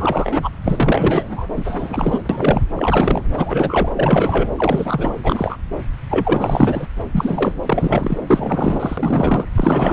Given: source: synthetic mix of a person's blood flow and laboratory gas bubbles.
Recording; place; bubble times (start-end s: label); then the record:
Doppler ultrasound of blood flow; subclavian vein
0.00-0.49 s: bubbles
0.64-1.46 s: bubbles
1.56-2.22 s: bubbles
2.29-2.66 s: bubbles
2.76-3.22 s: bubbles
3.37-3.92 s: bubbles
3.96-4.50 s: bubbles
4.57-5.13 s: bubbles
5.23-5.58 s: bubbles
6.09-6.87 s: bubbles
7.12-7.54 s: bubbles
7.66-8.18 s: bubbles
8.26-9.45 s: bubbles
9.54-9.93 s: bubbles
From the record:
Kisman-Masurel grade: 343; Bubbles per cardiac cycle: rolling drumbeat, 9 or more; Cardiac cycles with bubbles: 100%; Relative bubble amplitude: loud (0.450 to 0.775); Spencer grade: 3 (all of the cardiac periods contain showers or single bubble signals, but not dominating or overriding the cardiac motion signals); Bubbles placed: anywhere in the cardiac cycle